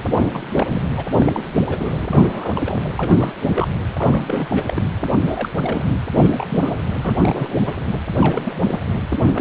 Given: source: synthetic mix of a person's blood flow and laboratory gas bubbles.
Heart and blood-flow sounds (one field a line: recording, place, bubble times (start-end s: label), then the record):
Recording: Doppler ultrasound of blood flow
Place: precordium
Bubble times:
0.05-0.82 s: bubbles
0.97-1.06 s: bubbles
1.18-1.66 s: bubbles
1.69-1.95 s: bubbles
1.99-2.50 s: bubbles
2.54-2.62 s: bubbles
2.65-2.81 s: bubbles
2.95-3.32 s: bubbles
3.46-3.68 s: bubbles
3.98-4.83 s: bubbles
5.25-5.49 s: bubbles
5.59-5.85 s: bubbles
6.15-6.46 s: bubbles
6.49-6.75 s: bubbles
7.01-7.59 s: bubbles
7.65-7.72 s: bubbles
8.15-8.53 s: bubbles
8.67-8.80 s: bubbles
9.09-9.17 s: bubbles
9.26-9.41 s: bubbles
From the record:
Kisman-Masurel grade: 342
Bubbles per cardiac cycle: rolling drumbeat, 9 or more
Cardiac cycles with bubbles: 100%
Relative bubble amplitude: moderate (0.250 to 0.450)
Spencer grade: 3 (all of the cardiac periods contain showers or single bubble signals, but not dominating or overriding the cardiac motion signals)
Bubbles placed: anywhere in the cardiac cycle